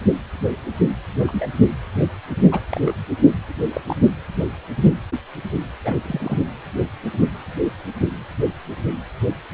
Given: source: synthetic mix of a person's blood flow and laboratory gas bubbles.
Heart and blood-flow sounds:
Doppler ultrasound of blood flow; precordium
1.27-1.47 s: bubbles
2.52-2.60 s: bubbles
2.71-2.79 s: bubbles
2.85-2.94 s: bubbles
3.73-3.81 s: bubbles
3.86-3.96 s: bubbles
5.83-5.95 s: bubbles
6.02-6.42 s: bubbles
From the record:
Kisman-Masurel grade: 121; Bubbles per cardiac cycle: 1 to 2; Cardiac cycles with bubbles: 10 to 50%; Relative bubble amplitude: barely perceptible (0.100 to 0.250); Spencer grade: 2 (many but less than half of the cardiac periods contain bubble signals, singularly or in groups); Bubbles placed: anywhere in the cardiac cycle

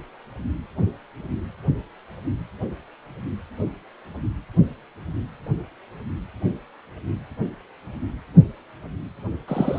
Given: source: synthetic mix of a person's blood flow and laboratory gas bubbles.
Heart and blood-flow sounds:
Doppler ultrasound of blood flow; precordium
9.47-9.79 s: bubbles
From the record:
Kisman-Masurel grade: 112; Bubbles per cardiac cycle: 1 to 2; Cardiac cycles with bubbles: 1 to 10%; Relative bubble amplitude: moderate (0.250 to 0.450); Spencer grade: 1 (occasional bubble signal discernible with the cardiac motion signal, with majority of cardiac periods free of bubbles); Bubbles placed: anywhere in the cardiac cycle

